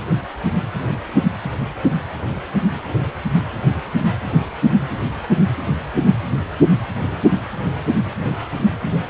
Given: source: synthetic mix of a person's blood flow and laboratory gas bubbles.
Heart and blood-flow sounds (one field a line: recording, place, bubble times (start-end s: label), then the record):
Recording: Doppler ultrasound of blood flow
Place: precordium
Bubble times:
no bubbles
From the record:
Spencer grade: 0 (complete lack of bubble signals)